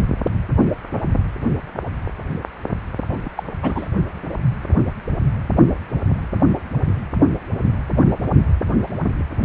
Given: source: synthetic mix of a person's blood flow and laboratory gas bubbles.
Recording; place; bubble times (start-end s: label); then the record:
Doppler ultrasound of blood flow; precordium
3.08-3.18 s: bubbles
3.25-3.29 s: bubbles
3.37-3.43 s: bubbles
3.62-3.86 s: bubbles
From the record:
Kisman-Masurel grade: 222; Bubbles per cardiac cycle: several, 3 to 8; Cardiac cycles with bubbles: 10 to 50%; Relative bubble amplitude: moderate (0.250 to 0.450); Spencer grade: 2 (many but less than half of the cardiac periods contain bubble signals, singularly or in groups); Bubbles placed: only in the low amplitude regions of the cardiac cycle